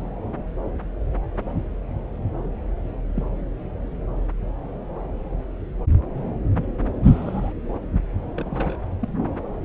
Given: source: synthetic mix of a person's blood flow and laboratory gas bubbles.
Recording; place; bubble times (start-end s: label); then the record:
Doppler ultrasound of blood flow; subclavian vein
3.08-3.22 s: bubbles
7.03-7.52 s: bubbles
7.72-7.80 s: bubbles
8.37-8.76 s: bubbles
8.99-9.12 s: bubbles
From the record:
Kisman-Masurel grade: 121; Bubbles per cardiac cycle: 1 to 2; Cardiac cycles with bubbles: 10 to 50%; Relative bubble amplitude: barely perceptible (0.100 to 0.250); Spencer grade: 2 (many but less than half of the cardiac periods contain bubble signals, singularly or in groups); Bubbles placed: anywhere in the cardiac cycle